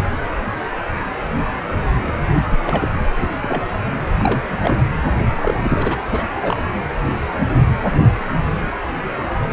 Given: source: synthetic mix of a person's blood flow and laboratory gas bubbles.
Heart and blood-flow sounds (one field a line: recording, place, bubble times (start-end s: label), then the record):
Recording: Doppler ultrasound of blood flow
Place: precordium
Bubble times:
0.03-0.08 s: bubbles
2.46-2.58 s: bubbles
2.66-3.05 s: bubbles
3.17-3.29 s: bubbles
3.40-3.63 s: bubbles
4.18-4.59 s: bubbles
4.62-4.75 s: bubbles
4.78-4.86 s: bubbles
5.30-6.03 s: bubbles
6.10-6.26 s: bubbles
6.42-6.57 s: bubbles
From the record:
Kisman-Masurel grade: 332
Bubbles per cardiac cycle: rolling drumbeat, 9 or more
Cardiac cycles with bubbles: 50 to 99%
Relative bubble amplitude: moderate (0.250 to 0.450)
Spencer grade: 3 (all of the cardiac periods contain showers or single bubble signals, but not dominating or overriding the cardiac motion signals)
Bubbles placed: anywhere in the cardiac cycle